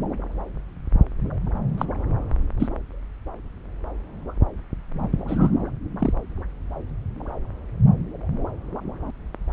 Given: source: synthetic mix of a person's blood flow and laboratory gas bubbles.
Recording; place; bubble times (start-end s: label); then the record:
Doppler ultrasound of blood flow; subclavian vein
1.77-1.85 s: bubbles
2.60-2.68 s: bubbles
5.28-5.50 s: bubbles
5.99-6.13 s: bubbles
From the record:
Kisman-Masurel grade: 122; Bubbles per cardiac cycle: 1 to 2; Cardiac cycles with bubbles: 10 to 50%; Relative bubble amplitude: moderate (0.250 to 0.450); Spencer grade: 2 (many but less than half of the cardiac periods contain bubble signals, singularly or in groups); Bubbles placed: anywhere in the cardiac cycle